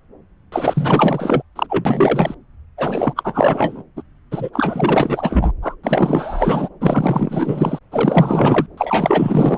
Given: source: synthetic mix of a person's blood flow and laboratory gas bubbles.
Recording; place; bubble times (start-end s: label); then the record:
Doppler ultrasound of blood flow; subclavian vein
0.52-1.43 s: bubbles
1.55-1.67 s: bubbles
1.69-2.35 s: bubbles
2.77-3.83 s: bubbles
3.96-4.02 s: bubbles
4.31-4.50 s: bubbles
4.53-5.51 s: bubbles
5.62-5.75 s: bubbles
5.83-6.69 s: bubbles
6.80-7.79 s: bubbles
7.91-8.66 s: bubbles
8.77-9.57 s: bubbles
From the record:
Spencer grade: 4 (maximum detectable bubble signal sounding continuously throughout systole and diastole of every cardiac period, and overriding the amplitude of the normal cardiac signals); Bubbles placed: anywhere in the cardiac cycle